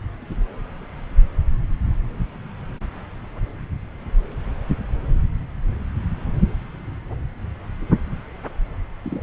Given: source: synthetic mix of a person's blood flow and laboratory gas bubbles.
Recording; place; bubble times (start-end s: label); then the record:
Doppler ultrasound of blood flow; subclavian vein
9.03-9.23 s: bubbles
From the record:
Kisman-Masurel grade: 111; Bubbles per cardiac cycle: 1 to 2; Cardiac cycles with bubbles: 1 to 10%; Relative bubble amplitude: barely perceptible (0.100 to 0.250); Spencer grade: 1 (occasional bubble signal discernible with the cardiac motion signal, with majority of cardiac periods free of bubbles); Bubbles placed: anywhere in the cardiac cycle